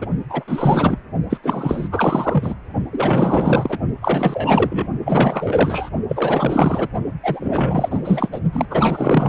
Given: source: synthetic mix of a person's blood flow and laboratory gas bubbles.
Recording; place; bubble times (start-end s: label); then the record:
Doppler ultrasound of blood flow; precordium
0.00-0.06 s: bubbles
0.29-0.44 s: bubbles
0.47-0.99 s: bubbles
1.29-1.38 s: bubbles
1.43-1.89 s: bubbles
1.91-2.55 s: bubbles
2.92-3.78 s: bubbles
4.02-4.87 s: bubbles
5.06-5.90 s: bubbles
6.08-6.88 s: bubbles
7.23-8.00 s: bubbles
8.04-8.29 s: bubbles
8.31-8.40 s: bubbles
8.52-8.67 s: bubbles
8.70-9.29 s: bubbles
From the record:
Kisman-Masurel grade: 444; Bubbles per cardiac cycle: continuous sound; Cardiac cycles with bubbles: 100%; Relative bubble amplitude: maximal (0.775 to 0.999); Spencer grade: 4 (maximum detectable bubble signal sounding continuously throughout systole and diastole of every cardiac period, and overriding the amplitude of the normal cardiac signals); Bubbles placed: only in the low amplitude regions of the cardiac cycle